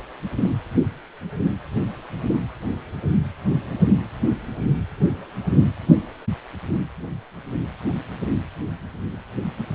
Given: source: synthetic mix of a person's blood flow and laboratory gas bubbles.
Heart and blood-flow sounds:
Doppler ultrasound of blood flow; precordium
no bubbles
From the record:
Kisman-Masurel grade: 000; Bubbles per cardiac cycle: 0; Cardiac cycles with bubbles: 0%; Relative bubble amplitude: no bubbles discernible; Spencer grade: 0 (complete lack of bubble signals)

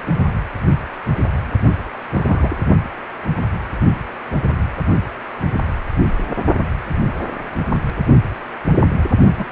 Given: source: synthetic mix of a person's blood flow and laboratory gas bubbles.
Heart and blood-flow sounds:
Doppler ultrasound of blood flow; precordium
2.11-2.58 s: bubbles
9.38-9.45 s: bubbles
From the record:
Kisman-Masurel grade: 122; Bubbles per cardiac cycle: 1 to 2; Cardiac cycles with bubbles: 10 to 50%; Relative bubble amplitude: moderate (0.250 to 0.450); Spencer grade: 2 (many but less than half of the cardiac periods contain bubble signals, singularly or in groups); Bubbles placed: only in the low amplitude regions of the cardiac cycle

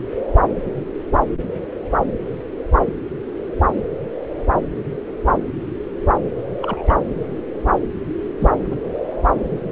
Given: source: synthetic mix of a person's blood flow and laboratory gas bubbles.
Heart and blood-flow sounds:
Doppler ultrasound of blood flow; subclavian vein
6.62-6.95 s: bubbles
8.38-8.50 s: bubbles
8.71-8.75 s: bubbles
From the record:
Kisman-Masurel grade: 112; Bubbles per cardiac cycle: 1 to 2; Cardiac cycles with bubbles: 1 to 10%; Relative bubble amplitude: moderate (0.250 to 0.450); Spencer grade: 1 (occasional bubble signal discernible with the cardiac motion signal, with majority of cardiac periods free of bubbles); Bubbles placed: anywhere in the cardiac cycle

